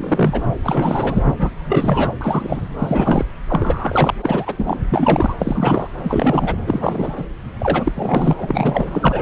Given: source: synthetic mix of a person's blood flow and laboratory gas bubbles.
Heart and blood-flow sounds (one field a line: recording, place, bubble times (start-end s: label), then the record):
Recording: Doppler ultrasound of blood flow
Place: subclavian vein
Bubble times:
0.00-0.44 s: bubbles
0.64-1.22 s: bubbles
1.39-1.50 s: bubbles
1.68-2.12 s: bubbles
2.21-2.68 s: bubbles
2.79-3.25 s: bubbles
3.48-4.14 s: bubbles
4.21-4.79 s: bubbles
4.89-5.36 s: bubbles
5.39-5.88 s: bubbles
6.04-6.55 s: bubbles
6.67-7.26 s: bubbles
7.60-7.92 s: bubbles
7.95-8.34 s: bubbles
8.38-8.88 s: bubbles
8.91-9.22 s: bubbles
From the record:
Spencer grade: 3 (all of the cardiac periods contain showers or single bubble signals, but not dominating or overriding the cardiac motion signals)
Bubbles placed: anywhere in the cardiac cycle